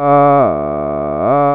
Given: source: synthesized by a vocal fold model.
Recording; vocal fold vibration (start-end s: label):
sustained vowel that changes in the middle
0.00-0.36 s: 142.5 Hz, open quotient 0.39
0.56-1.16 s: 73.4 Hz, open quotient 0.20
1.36-1.55 s: 142.5 Hz, open quotient 0.39